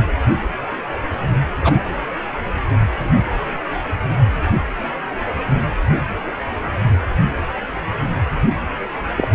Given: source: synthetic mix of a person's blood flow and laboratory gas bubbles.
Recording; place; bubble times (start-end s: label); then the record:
Doppler ultrasound of blood flow; precordium
1.61-1.73 s: bubbles
9.17-9.29 s: bubbles
From the record:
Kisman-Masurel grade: 123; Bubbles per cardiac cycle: 1 to 2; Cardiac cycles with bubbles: 10 to 50%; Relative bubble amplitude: loud (0.450 to 0.775); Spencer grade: 2 (many but less than half of the cardiac periods contain bubble signals, singularly or in groups); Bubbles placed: anywhere in the cardiac cycle